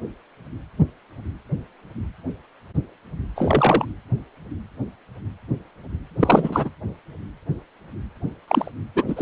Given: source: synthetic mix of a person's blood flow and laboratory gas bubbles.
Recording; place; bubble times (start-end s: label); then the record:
Doppler ultrasound of blood flow; precordium
3.35-3.85 s: bubbles
6.20-6.69 s: bubbles
8.48-8.70 s: bubbles
8.95-9.04 s: bubbles
9.08-9.22 s: bubbles
From the record:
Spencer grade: 2 (many but less than half of the cardiac periods contain bubble signals, singularly or in groups); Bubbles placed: anywhere in the cardiac cycle